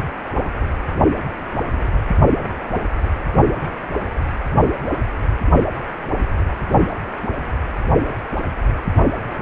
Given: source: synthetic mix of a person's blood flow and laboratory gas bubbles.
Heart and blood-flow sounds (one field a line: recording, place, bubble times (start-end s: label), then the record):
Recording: Doppler ultrasound of blood flow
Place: precordium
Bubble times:
no bubbles
From the record:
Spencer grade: 0 (complete lack of bubble signals)